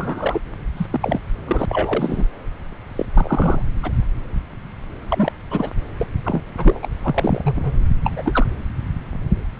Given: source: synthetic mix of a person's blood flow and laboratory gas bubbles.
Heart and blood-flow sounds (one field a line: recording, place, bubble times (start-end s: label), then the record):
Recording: Doppler ultrasound of blood flow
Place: subclavian vein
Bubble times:
0.00-0.41 s: bubbles
0.77-0.87 s: bubbles
0.91-1.21 s: bubbles
1.47-1.66 s: bubbles
1.68-2.26 s: bubbles
2.96-3.06 s: bubbles
3.14-3.62 s: bubbles
3.82-3.92 s: bubbles
5.10-5.32 s: bubbles
5.50-5.71 s: bubbles
5.99-6.06 s: bubbles
6.25-6.42 s: bubbles
6.57-6.80 s: bubbles
6.82-6.88 s: bubbles
6.92-6.94 s: bubbles
7.03-7.73 s: bubbles
8.04-8.46 s: bubbles
From the record:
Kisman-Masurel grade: 232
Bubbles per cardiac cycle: several, 3 to 8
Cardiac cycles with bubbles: 50 to 99%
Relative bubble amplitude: moderate (0.250 to 0.450)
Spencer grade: 3 (all of the cardiac periods contain showers or single bubble signals, but not dominating or overriding the cardiac motion signals)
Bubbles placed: anywhere in the cardiac cycle